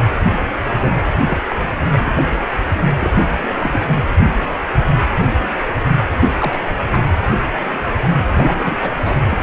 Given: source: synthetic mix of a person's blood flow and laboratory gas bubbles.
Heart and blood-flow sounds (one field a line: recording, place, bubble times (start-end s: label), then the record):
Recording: Doppler ultrasound of blood flow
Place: precordium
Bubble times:
0.79-0.94 s: bubbles
1.27-1.38 s: bubbles
1.50-1.56 s: bubbles
1.92-2.23 s: bubbles
2.98-3.38 s: bubbles
3.42-3.50 s: bubbles
3.56-3.82 s: bubbles
6.38-6.64 s: bubbles
6.70-6.74 s: bubbles
6.92-7.03 s: bubbles
8.26-8.77 s: bubbles
8.81-8.90 s: bubbles
9.04-9.14 s: bubbles
9.30-9.38 s: bubbles
9.40-9.43 s: bubbles
From the record:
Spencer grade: 2 (many but less than half of the cardiac periods contain bubble signals, singularly or in groups)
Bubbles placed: anywhere in the cardiac cycle